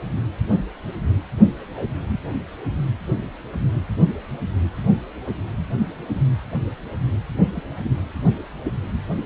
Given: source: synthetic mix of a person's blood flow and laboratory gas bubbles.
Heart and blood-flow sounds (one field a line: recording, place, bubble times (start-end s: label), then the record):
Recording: Doppler ultrasound of blood flow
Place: precordium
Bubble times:
7.55-7.62 s: bubbles
7.83-7.91 s: bubbles
From the record:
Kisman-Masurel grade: 111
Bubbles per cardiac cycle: 1 to 2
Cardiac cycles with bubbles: 1 to 10%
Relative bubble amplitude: barely perceptible (0.100 to 0.250)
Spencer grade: 1 (occasional bubble signal discernible with the cardiac motion signal, with majority of cardiac periods free of bubbles)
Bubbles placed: anywhere in the cardiac cycle